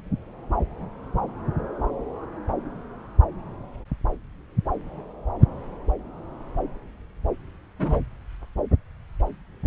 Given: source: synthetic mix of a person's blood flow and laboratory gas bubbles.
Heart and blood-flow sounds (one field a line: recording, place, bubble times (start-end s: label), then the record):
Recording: Doppler ultrasound of blood flow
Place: subclavian vein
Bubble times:
7.79-8.00 s: bubbles
From the record:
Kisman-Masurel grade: 111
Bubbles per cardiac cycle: 1 to 2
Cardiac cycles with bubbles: 1 to 10%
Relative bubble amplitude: barely perceptible (0.100 to 0.250)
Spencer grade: 1 (occasional bubble signal discernible with the cardiac motion signal, with majority of cardiac periods free of bubbles)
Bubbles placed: anywhere in the cardiac cycle